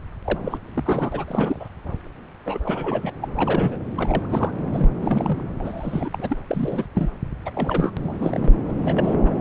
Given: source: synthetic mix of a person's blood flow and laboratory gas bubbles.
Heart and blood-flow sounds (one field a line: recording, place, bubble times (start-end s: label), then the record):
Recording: Doppler ultrasound of blood flow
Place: subclavian vein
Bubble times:
0.24-0.58 s: bubbles
0.74-1.25 s: bubbles
1.27-1.69 s: bubbles
2.45-2.60 s: bubbles
2.63-3.11 s: bubbles
3.21-3.28 s: bubbles
3.35-3.77 s: bubbles
3.96-4.26 s: bubbles
4.29-4.52 s: bubbles
4.73-4.90 s: bubbles
5.01-5.44 s: bubbles
5.59-6.10 s: bubbles
6.13-6.38 s: bubbles
6.47-6.86 s: bubbles
6.95-7.11 s: bubbles
7.45-7.51 s: bubbles
7.54-7.91 s: bubbles
7.96-8.52 s: bubbles
8.66-9.35 s: bubbles
From the record:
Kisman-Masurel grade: 332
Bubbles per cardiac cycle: rolling drumbeat, 9 or more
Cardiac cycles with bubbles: 50 to 99%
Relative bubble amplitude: moderate (0.250 to 0.450)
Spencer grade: 3 (all of the cardiac periods contain showers or single bubble signals, but not dominating or overriding the cardiac motion signals)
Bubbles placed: anywhere in the cardiac cycle